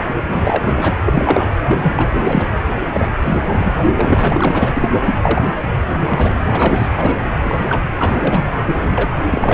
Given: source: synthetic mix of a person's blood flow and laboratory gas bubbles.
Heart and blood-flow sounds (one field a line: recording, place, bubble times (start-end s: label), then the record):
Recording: Doppler ultrasound of blood flow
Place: precordium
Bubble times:
0.28-0.94 s: bubbles
1.05-1.54 s: bubbles
1.67-2.10 s: bubbles
2.13-2.50 s: bubbles
2.69-2.75 s: bubbles
2.93-3.08 s: bubbles
3.21-3.74 s: bubbles
3.94-4.88 s: bubbles
5.23-5.51 s: bubbles
6.04-6.40 s: bubbles
6.47-6.90 s: bubbles
6.97-7.16 s: bubbles
7.19-7.24 s: bubbles
7.45-7.80 s: bubbles
7.99-8.46 s: bubbles
8.66-9.09 s: bubbles
9.25-9.54 s: bubbles
From the record:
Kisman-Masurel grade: 243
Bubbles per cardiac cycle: several, 3 to 8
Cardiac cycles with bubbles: 100%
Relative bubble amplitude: loud (0.450 to 0.775)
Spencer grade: 3 (all of the cardiac periods contain showers or single bubble signals, but not dominating or overriding the cardiac motion signals)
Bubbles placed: anywhere in the cardiac cycle